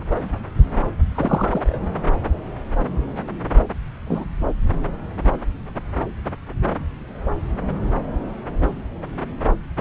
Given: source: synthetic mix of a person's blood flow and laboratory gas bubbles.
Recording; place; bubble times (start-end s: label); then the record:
Doppler ultrasound of blood flow; subclavian vein
1.15-1.79 s: bubbles
4.08-4.24 s: bubbles
From the record:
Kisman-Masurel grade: 123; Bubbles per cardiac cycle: 1 to 2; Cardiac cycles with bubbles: 10 to 50%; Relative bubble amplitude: loud (0.450 to 0.775); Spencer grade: 2 (many but less than half of the cardiac periods contain bubble signals, singularly or in groups); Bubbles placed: anywhere in the cardiac cycle